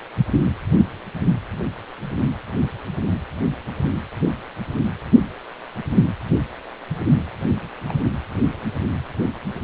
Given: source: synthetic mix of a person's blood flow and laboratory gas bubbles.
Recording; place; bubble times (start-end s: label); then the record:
Doppler ultrasound of blood flow; precordium
7.88-7.93 s: bubbles
8.03-8.11 s: bubbles
From the record:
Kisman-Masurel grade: 111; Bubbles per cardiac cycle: 1 to 2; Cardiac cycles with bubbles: 1 to 10%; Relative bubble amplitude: barely perceptible (0.100 to 0.250); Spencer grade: 1 (occasional bubble signal discernible with the cardiac motion signal, with majority of cardiac periods free of bubbles); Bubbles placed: anywhere in the cardiac cycle